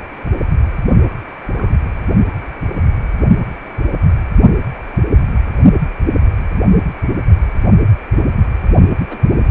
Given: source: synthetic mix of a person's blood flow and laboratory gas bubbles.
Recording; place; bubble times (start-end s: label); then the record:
Doppler ultrasound of blood flow; precordium
1.58-1.77 s: bubbles
9.08-9.18 s: bubbles
From the record:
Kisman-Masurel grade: 121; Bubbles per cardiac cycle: 1 to 2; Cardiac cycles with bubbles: 10 to 50%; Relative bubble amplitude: barely perceptible (0.100 to 0.250); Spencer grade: 2 (many but less than half of the cardiac periods contain bubble signals, singularly or in groups); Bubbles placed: only in the low amplitude regions of the cardiac cycle